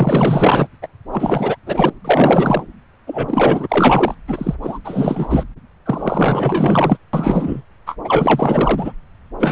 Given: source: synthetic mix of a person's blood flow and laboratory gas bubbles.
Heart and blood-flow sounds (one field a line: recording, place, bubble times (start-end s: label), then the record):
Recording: Doppler ultrasound of blood flow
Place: subclavian vein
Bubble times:
0.00-0.67 s: bubbles
0.82-0.88 s: bubbles
1.11-1.56 s: bubbles
1.67-1.90 s: bubbles
2.04-2.63 s: bubbles
3.06-4.14 s: bubbles
4.28-4.55 s: bubbles
4.62-4.79 s: bubbles
4.84-5.43 s: bubbles
5.86-6.97 s: bubbles
7.13-7.62 s: bubbles
7.87-7.96 s: bubbles
8.04-8.93 s: bubbles
9.39-9.52 s: bubbles
From the record:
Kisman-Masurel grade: 444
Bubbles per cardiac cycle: continuous sound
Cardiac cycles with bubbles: 100%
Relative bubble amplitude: maximal (0.775 to 0.999)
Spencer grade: 4 (maximum detectable bubble signal sounding continuously throughout systole and diastole of every cardiac period, and overriding the amplitude of the normal cardiac signals)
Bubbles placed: anywhere in the cardiac cycle